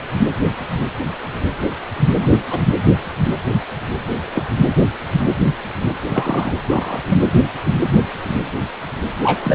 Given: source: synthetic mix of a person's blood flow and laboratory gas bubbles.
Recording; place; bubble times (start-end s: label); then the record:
Doppler ultrasound of blood flow; precordium
2.21-2.33 s: bubbles
2.50-2.60 s: bubbles
4.33-4.46 s: bubbles
6.08-6.53 s: bubbles
6.68-7.00 s: bubbles
7.09-7.18 s: bubbles
9.23-9.55 s: bubbles
From the record:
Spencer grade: 2 (many but less than half of the cardiac periods contain bubble signals, singularly or in groups); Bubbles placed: anywhere in the cardiac cycle